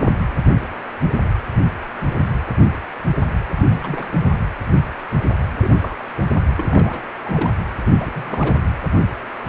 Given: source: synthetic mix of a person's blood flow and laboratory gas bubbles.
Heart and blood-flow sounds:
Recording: Doppler ultrasound of blood flow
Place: precordium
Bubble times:
0.00-0.11 s: bubbles
3.57-3.64 s: bubbles
3.69-4.21 s: bubbles
5.61-5.79 s: bubbles
5.81-5.96 s: bubbles
6.17-6.21 s: bubbles
6.56-7.10 s: bubbles
7.24-7.51 s: bubbles
7.85-7.91 s: bubbles
7.99-8.12 s: bubbles
8.15-8.59 s: bubbles
From the record:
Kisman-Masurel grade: 221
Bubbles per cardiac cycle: several, 3 to 8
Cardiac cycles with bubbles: 10 to 50%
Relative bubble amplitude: barely perceptible (0.100 to 0.250)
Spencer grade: 2 (many but less than half of the cardiac periods contain bubble signals, singularly or in groups)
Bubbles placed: anywhere in the cardiac cycle

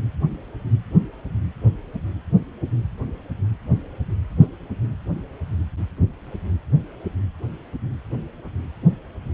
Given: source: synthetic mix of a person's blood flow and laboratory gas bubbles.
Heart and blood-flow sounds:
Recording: Doppler ultrasound of blood flow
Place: precordium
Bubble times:
4.42-4.47 s: bubbles
From the record:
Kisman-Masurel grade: 111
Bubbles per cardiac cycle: 1 to 2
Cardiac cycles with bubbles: 1 to 10%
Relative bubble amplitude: barely perceptible (0.100 to 0.250)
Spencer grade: 1 (occasional bubble signal discernible with the cardiac motion signal, with majority of cardiac periods free of bubbles)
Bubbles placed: anywhere in the cardiac cycle

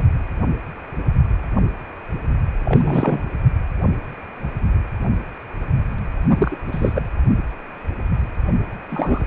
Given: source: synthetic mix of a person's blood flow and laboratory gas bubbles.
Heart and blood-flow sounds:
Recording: Doppler ultrasound of blood flow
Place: precordium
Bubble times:
0.00-0.07 s: bubbles
2.64-3.23 s: bubbles
6.29-6.58 s: bubbles
6.71-7.02 s: bubbles
8.89-9.26 s: bubbles
From the record:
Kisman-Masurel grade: 223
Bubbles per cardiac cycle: several, 3 to 8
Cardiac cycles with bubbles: 10 to 50%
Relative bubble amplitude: loud (0.450 to 0.775)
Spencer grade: 2 (many but less than half of the cardiac periods contain bubble signals, singularly or in groups)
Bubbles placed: anywhere in the cardiac cycle

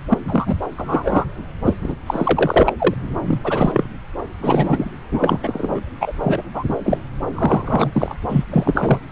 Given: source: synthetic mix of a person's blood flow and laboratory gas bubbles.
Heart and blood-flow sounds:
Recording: Doppler ultrasound of blood flow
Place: subclavian vein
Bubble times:
0.08-0.18 s: bubbles
0.28-0.55 s: bubbles
0.78-1.25 s: bubbles
1.65-1.73 s: bubbles
1.82-1.96 s: bubbles
2.06-2.73 s: bubbles
2.79-2.94 s: bubbles
3.23-3.40 s: bubbles
3.44-3.89 s: bubbles
4.42-5.00 s: bubbles
5.11-5.80 s: bubbles
6.00-6.11 s: bubbles
6.23-6.42 s: bubbles
6.54-6.63 s: bubbles
6.68-6.76 s: bubbles
6.83-6.98 s: bubbles
7.33-8.15 s: bubbles
8.28-8.45 s: bubbles
8.50-8.99 s: bubbles
From the record:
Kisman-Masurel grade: 243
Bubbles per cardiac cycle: several, 3 to 8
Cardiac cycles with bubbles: 100%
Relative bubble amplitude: loud (0.450 to 0.775)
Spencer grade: 3 (all of the cardiac periods contain showers or single bubble signals, but not dominating or overriding the cardiac motion signals)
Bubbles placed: anywhere in the cardiac cycle

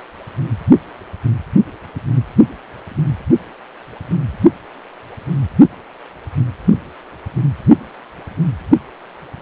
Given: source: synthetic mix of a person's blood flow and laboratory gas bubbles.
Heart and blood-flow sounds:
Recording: Doppler ultrasound of blood flow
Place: precordium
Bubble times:
no bubbles
From the record:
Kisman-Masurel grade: 000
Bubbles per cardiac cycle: 0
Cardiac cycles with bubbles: 0%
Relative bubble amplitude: no bubbles discernible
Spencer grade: 0 (complete lack of bubble signals)

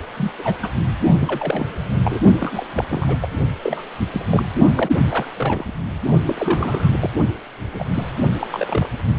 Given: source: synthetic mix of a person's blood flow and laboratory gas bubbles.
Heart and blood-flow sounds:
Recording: Doppler ultrasound of blood flow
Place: precordium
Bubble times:
0.16-0.31 s: bubbles
0.38-0.55 s: bubbles
0.61-0.70 s: bubbles
1.21-1.66 s: bubbles
1.90-2.19 s: bubbles
2.40-2.67 s: bubbles
2.75-2.85 s: bubbles
2.90-3.17 s: bubbles
3.21-3.33 s: bubbles
3.64-3.84 s: bubbles
4.12-4.25 s: bubbles
4.29-4.43 s: bubbles
4.77-4.90 s: bubbles
5.09-5.26 s: bubbles
5.35-5.64 s: bubbles
6.27-6.93 s: bubbles
7.00-7.10 s: bubbles
7.72-7.86 s: bubbles
7.93-8.12 s: bubbles
8.39-8.47 s: bubbles
8.50-8.92 s: bubbles
From the record:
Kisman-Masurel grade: 242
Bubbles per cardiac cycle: several, 3 to 8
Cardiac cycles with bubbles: 100%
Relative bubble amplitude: moderate (0.250 to 0.450)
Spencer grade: 3 (all of the cardiac periods contain showers or single bubble signals, but not dominating or overriding the cardiac motion signals)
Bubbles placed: only in the low amplitude regions of the cardiac cycle

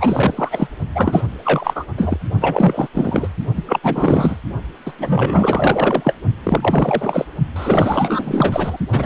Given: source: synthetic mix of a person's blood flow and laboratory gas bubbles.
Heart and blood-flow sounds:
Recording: Doppler ultrasound of blood flow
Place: precordium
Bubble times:
0.00-0.68 s: bubbles
0.95-1.23 s: bubbles
1.45-1.84 s: bubbles
1.97-2.18 s: bubbles
2.41-2.88 s: bubbles
2.94-3.28 s: bubbles
3.56-3.63 s: bubbles
3.66-3.79 s: bubbles
3.82-4.36 s: bubbles
4.85-4.92 s: bubbles
4.97-6.15 s: bubbles
6.43-7.26 s: bubbles
7.56-8.77 s: bubbles
8.88-9.06 s: bubbles
From the record:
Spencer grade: 4 (maximum detectable bubble signal sounding continuously throughout systole and diastole of every cardiac period, and overriding the amplitude of the normal cardiac signals)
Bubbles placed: only in the low amplitude regions of the cardiac cycle

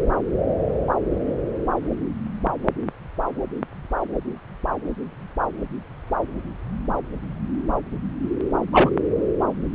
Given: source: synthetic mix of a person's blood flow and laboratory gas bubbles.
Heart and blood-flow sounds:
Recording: Doppler ultrasound of blood flow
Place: subclavian vein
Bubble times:
8.72-8.90 s: bubbles
From the record:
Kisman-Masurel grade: 113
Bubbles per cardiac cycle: 1 to 2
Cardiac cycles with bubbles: 1 to 10%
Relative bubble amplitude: loud (0.450 to 0.775)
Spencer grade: 1 (occasional bubble signal discernible with the cardiac motion signal, with majority of cardiac periods free of bubbles)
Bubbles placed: anywhere in the cardiac cycle

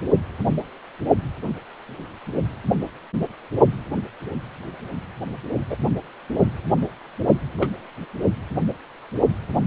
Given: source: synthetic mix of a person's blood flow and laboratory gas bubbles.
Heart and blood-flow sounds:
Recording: Doppler ultrasound of blood flow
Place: precordium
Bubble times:
5.70-5.76 s: bubbles
7.58-7.71 s: bubbles
From the record:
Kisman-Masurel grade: 122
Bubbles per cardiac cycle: 1 to 2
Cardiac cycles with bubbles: 10 to 50%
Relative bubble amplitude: moderate (0.250 to 0.450)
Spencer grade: 2 (many but less than half of the cardiac periods contain bubble signals, singularly or in groups)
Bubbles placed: only in the low amplitude regions of the cardiac cycle

